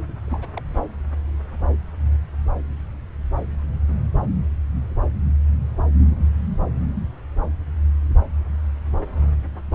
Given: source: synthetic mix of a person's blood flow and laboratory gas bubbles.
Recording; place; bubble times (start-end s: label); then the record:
Doppler ultrasound of blood flow; subclavian vein
0.08-0.12 s: bubbles
0.27-0.47 s: bubbles
0.56-0.62 s: bubbles
From the record:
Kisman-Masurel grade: 211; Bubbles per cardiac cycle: several, 3 to 8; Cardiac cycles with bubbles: 1 to 10%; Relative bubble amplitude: barely perceptible (0.100 to 0.250); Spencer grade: 1 (occasional bubble signal discernible with the cardiac motion signal, with majority of cardiac periods free of bubbles); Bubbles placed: anywhere in the cardiac cycle